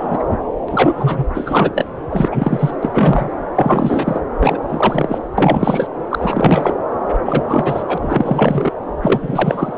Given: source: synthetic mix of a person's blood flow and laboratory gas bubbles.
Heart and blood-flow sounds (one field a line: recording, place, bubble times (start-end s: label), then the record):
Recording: Doppler ultrasound of blood flow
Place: subclavian vein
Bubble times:
0.00-0.23 s: bubbles
0.27-0.38 s: bubbles
0.68-1.24 s: bubbles
1.34-1.84 s: bubbles
2.10-2.76 s: bubbles
2.83-3.36 s: bubbles
3.56-4.20 s: bubbles
4.39-4.57 s: bubbles
4.67-5.18 s: bubbles
5.38-5.88 s: bubbles
6.10-6.74 s: bubbles
7.25-7.44 s: bubbles
7.47-7.83 s: bubbles
7.87-7.98 s: bubbles
8.02-8.71 s: bubbles
9.02-9.78 s: bubbles
From the record:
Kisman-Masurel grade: 343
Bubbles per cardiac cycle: rolling drumbeat, 9 or more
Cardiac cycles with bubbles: 100%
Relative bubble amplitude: loud (0.450 to 0.775)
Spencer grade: 3 (all of the cardiac periods contain showers or single bubble signals, but not dominating or overriding the cardiac motion signals)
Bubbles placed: anywhere in the cardiac cycle